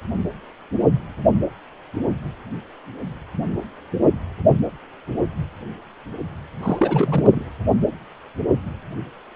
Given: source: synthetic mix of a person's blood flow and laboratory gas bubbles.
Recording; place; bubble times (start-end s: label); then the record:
Doppler ultrasound of blood flow; precordium
6.62-7.45 s: bubbles
From the record:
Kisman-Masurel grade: 212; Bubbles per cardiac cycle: several, 3 to 8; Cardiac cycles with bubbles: 1 to 10%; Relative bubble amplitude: moderate (0.250 to 0.450); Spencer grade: 1 (occasional bubble signal discernible with the cardiac motion signal, with majority of cardiac periods free of bubbles); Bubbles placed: anywhere in the cardiac cycle